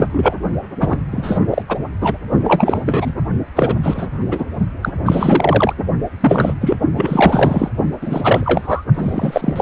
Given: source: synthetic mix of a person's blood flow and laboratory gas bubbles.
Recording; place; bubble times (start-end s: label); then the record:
Doppler ultrasound of blood flow; precordium
0.00-0.09 s: bubbles
0.12-0.35 s: bubbles
0.80-1.04 s: bubbles
1.11-1.39 s: bubbles
1.50-1.62 s: bubbles
1.68-1.78 s: bubbles
2.01-2.17 s: bubbles
2.44-3.13 s: bubbles
3.55-3.76 s: bubbles
3.83-4.08 s: bubbles
4.31-4.45 s: bubbles
4.82-4.92 s: bubbles
5.06-5.73 s: bubbles
6.20-6.77 s: bubbles
6.96-7.70 s: bubbles
8.00-8.85 s: bubbles
8.94-9.62 s: bubbles
From the record:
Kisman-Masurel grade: 343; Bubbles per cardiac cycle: rolling drumbeat, 9 or more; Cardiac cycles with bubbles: 100%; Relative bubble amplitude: loud (0.450 to 0.775); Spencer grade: 3 (all of the cardiac periods contain showers or single bubble signals, but not dominating or overriding the cardiac motion signals); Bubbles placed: only in the low amplitude regions of the cardiac cycle